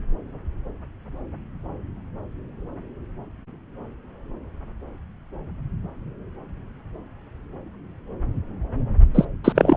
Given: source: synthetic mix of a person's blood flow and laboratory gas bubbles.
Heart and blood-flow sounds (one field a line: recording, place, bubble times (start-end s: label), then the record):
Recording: Doppler ultrasound of blood flow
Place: subclavian vein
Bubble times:
9.14-9.25 s: bubbles
9.44-9.53 s: bubbles
9.55-9.77 s: bubbles
From the record:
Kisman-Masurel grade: 213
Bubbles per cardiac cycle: several, 3 to 8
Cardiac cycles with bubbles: 1 to 10%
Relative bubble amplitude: loud (0.450 to 0.775)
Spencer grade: 1 (occasional bubble signal discernible with the cardiac motion signal, with majority of cardiac periods free of bubbles)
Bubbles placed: anywhere in the cardiac cycle